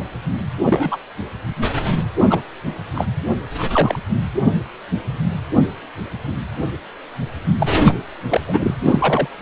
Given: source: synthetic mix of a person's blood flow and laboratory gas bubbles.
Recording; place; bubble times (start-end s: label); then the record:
Doppler ultrasound of blood flow; precordium
0.65-0.97 s: bubbles
2.20-2.26 s: bubbles
2.29-2.41 s: bubbles
2.94-3.06 s: bubbles
3.58-3.65 s: bubbles
3.72-3.99 s: bubbles
7.58-7.67 s: bubbles
7.85-7.98 s: bubbles
8.29-8.41 s: bubbles
8.46-8.74 s: bubbles
8.84-9.28 s: bubbles
From the record:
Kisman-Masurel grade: 233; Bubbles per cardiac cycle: several, 3 to 8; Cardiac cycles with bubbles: 50 to 99%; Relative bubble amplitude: loud (0.450 to 0.775); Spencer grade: 3 (all of the cardiac periods contain showers or single bubble signals, but not dominating or overriding the cardiac motion signals); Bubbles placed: anywhere in the cardiac cycle